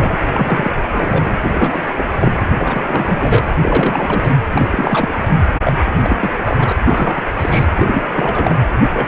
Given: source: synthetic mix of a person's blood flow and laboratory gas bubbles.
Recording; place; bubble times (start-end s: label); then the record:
Doppler ultrasound of blood flow; precordium
0.00-0.17 s: bubbles
0.33-0.74 s: bubbles
0.92-1.40 s: bubbles
1.54-1.84 s: bubbles
1.96-2.06 s: bubbles
2.12-2.32 s: bubbles
2.58-3.49 s: bubbles
3.62-4.32 s: bubbles
4.51-5.08 s: bubbles
5.29-5.41 s: bubbles
5.65-5.78 s: bubbles
5.85-5.91 s: bubbles
6.02-6.17 s: bubbles
6.20-6.30 s: bubbles
6.44-6.72 s: bubbles
6.85-7.26 s: bubbles
7.37-7.65 s: bubbles
7.77-8.05 s: bubbles
8.12-8.55 s: bubbles
8.93-9.08 s: bubbles
From the record:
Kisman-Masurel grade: 342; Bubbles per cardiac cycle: rolling drumbeat, 9 or more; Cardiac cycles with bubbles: 100%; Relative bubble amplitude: moderate (0.250 to 0.450); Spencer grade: 3 (all of the cardiac periods contain showers or single bubble signals, but not dominating or overriding the cardiac motion signals); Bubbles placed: anywhere in the cardiac cycle